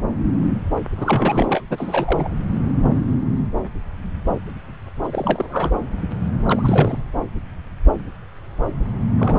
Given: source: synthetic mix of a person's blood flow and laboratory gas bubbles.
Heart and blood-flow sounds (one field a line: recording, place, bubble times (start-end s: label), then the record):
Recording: Doppler ultrasound of blood flow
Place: subclavian vein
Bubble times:
0.97-1.62 s: bubbles
1.70-2.28 s: bubbles
5.04-5.09 s: bubbles
5.12-5.72 s: bubbles
6.47-6.98 s: bubbles
9.18-9.39 s: bubbles
From the record:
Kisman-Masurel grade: 332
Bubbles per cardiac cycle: rolling drumbeat, 9 or more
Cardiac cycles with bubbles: 50 to 99%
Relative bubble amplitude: moderate (0.250 to 0.450)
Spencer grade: 3 (all of the cardiac periods contain showers or single bubble signals, but not dominating or overriding the cardiac motion signals)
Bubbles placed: anywhere in the cardiac cycle